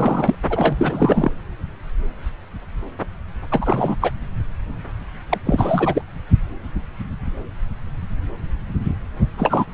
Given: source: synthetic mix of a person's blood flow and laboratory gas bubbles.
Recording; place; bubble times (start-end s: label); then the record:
Doppler ultrasound of blood flow; subclavian vein
0.00-0.35 s: bubbles
0.49-1.32 s: bubbles
3.51-3.96 s: bubbles
4.00-4.11 s: bubbles
5.29-5.38 s: bubbles
5.46-6.02 s: bubbles
9.37-9.72 s: bubbles
From the record:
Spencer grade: 3 (all of the cardiac periods contain showers or single bubble signals, but not dominating or overriding the cardiac motion signals); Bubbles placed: anywhere in the cardiac cycle